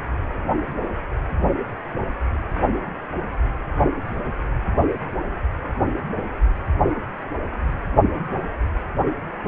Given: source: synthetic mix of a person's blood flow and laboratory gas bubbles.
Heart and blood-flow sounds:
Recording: Doppler ultrasound of blood flow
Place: precordium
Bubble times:
no bubbles
From the record:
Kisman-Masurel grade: 000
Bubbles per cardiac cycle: 0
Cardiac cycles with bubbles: 0%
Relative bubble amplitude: no bubbles discernible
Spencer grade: 0 (complete lack of bubble signals)

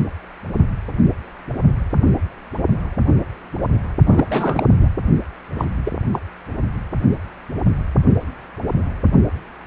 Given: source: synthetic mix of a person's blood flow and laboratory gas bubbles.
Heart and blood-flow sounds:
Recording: Doppler ultrasound of blood flow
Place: precordium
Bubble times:
4.07-4.25 s: bubbles
4.29-4.65 s: bubbles
4.81-4.90 s: bubbles
5.58-5.65 s: bubbles
5.85-5.92 s: bubbles
6.13-6.19 s: bubbles
From the record:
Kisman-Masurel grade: 222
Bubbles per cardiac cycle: several, 3 to 8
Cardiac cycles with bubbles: 10 to 50%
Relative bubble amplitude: moderate (0.250 to 0.450)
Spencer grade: 2 (many but less than half of the cardiac periods contain bubble signals, singularly or in groups)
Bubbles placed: only in the low amplitude regions of the cardiac cycle

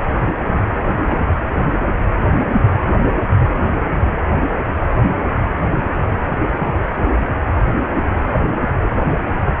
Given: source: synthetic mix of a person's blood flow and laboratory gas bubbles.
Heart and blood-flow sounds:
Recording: Doppler ultrasound of blood flow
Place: precordium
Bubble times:
1.08-1.21 s: bubbles
From the record:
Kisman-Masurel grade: 121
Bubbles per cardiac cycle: 1 to 2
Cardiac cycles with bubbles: 10 to 50%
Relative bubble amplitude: barely perceptible (0.100 to 0.250)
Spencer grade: 2 (many but less than half of the cardiac periods contain bubble signals, singularly or in groups)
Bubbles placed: anywhere in the cardiac cycle

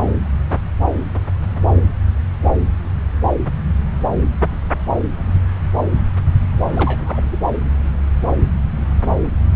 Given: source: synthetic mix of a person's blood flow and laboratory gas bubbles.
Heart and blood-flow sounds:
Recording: Doppler ultrasound of blood flow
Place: subclavian vein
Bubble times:
6.74-7.22 s: bubbles
7.32-7.38 s: bubbles
From the record:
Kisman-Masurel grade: 211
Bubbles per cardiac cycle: several, 3 to 8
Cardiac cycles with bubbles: 1 to 10%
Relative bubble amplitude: barely perceptible (0.100 to 0.250)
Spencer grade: 1 (occasional bubble signal discernible with the cardiac motion signal, with majority of cardiac periods free of bubbles)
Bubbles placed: anywhere in the cardiac cycle

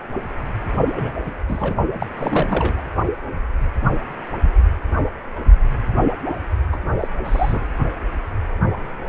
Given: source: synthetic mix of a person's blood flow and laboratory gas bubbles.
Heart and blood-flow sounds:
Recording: Doppler ultrasound of blood flow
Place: precordium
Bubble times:
0.96-1.12 s: bubbles
1.26-1.34 s: bubbles
1.48-1.74 s: bubbles
2.00-2.06 s: bubbles
2.19-2.86 s: bubbles
6.72-6.79 s: bubbles
7.00-7.08 s: bubbles
7.24-7.61 s: bubbles
From the record:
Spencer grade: 2 (many but less than half of the cardiac periods contain bubble signals, singularly or in groups)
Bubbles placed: only in the low amplitude regions of the cardiac cycle

